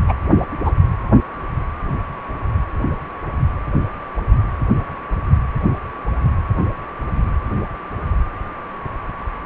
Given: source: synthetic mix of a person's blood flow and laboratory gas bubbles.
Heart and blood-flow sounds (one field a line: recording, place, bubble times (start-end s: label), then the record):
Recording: Doppler ultrasound of blood flow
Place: precordium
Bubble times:
0.08-0.14 s: bubbles
0.65-0.71 s: bubbles
From the record:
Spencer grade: 2 (many but less than half of the cardiac periods contain bubble signals, singularly or in groups)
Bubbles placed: anywhere in the cardiac cycle